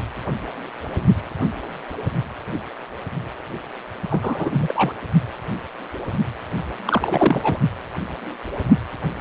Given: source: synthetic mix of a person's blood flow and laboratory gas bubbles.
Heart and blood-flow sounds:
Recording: Doppler ultrasound of blood flow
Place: precordium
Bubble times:
4.10-4.50 s: bubbles
4.54-4.92 s: bubbles
6.85-7.59 s: bubbles
From the record:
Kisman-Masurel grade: 222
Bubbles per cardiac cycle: several, 3 to 8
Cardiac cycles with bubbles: 10 to 50%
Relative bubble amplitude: moderate (0.250 to 0.450)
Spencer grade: 2 (many but less than half of the cardiac periods contain bubble signals, singularly or in groups)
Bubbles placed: only in the low amplitude regions of the cardiac cycle

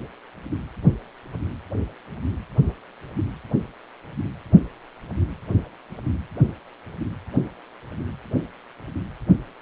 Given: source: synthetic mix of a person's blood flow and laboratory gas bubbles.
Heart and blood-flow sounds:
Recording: Doppler ultrasound of blood flow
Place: precordium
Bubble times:
no bubbles
From the record:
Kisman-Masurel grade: 000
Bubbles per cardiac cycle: 0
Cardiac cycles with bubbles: 0%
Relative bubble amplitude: no bubbles discernible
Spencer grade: 0 (complete lack of bubble signals)

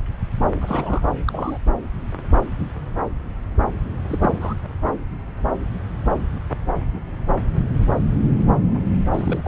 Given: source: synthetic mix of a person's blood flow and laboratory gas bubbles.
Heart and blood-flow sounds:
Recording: Doppler ultrasound of blood flow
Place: subclavian vein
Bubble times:
0.59-1.01 s: bubbles
1.25-1.58 s: bubbles
4.08-4.54 s: bubbles
9.13-9.41 s: bubbles
9.44-9.48 s: bubbles
From the record:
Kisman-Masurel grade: 221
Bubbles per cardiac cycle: several, 3 to 8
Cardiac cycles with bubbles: 10 to 50%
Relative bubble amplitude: barely perceptible (0.100 to 0.250)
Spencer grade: 2 (many but less than half of the cardiac periods contain bubble signals, singularly or in groups)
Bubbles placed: anywhere in the cardiac cycle

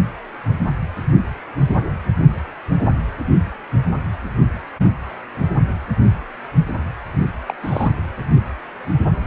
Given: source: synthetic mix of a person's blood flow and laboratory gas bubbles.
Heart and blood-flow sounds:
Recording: Doppler ultrasound of blood flow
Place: precordium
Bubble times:
7.48-7.54 s: bubbles
7.63-7.92 s: bubbles
From the record:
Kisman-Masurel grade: 212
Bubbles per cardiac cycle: several, 3 to 8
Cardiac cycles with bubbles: 1 to 10%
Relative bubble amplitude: moderate (0.250 to 0.450)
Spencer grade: 1 (occasional bubble signal discernible with the cardiac motion signal, with majority of cardiac periods free of bubbles)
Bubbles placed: anywhere in the cardiac cycle

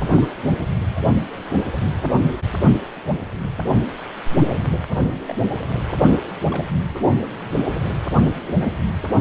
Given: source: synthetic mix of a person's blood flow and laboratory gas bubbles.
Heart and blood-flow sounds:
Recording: Doppler ultrasound of blood flow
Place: precordium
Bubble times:
0.00-0.26 s: bubbles
4.98-5.06 s: bubbles
5.26-5.34 s: bubbles
6.50-6.67 s: bubbles
From the record:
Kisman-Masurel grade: 121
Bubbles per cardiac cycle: 1 to 2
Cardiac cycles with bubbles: 10 to 50%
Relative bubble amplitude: barely perceptible (0.100 to 0.250)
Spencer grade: 2 (many but less than half of the cardiac periods contain bubble signals, singularly or in groups)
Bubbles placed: anywhere in the cardiac cycle

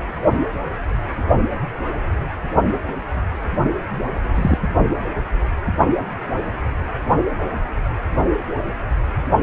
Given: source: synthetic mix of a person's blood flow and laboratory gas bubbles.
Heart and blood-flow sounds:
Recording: Doppler ultrasound of blood flow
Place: precordium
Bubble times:
4.34-4.58 s: bubbles
From the record:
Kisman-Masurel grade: 123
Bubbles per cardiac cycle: 1 to 2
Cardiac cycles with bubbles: 10 to 50%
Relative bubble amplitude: loud (0.450 to 0.775)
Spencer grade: 2 (many but less than half of the cardiac periods contain bubble signals, singularly or in groups)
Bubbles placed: only in the low amplitude regions of the cardiac cycle

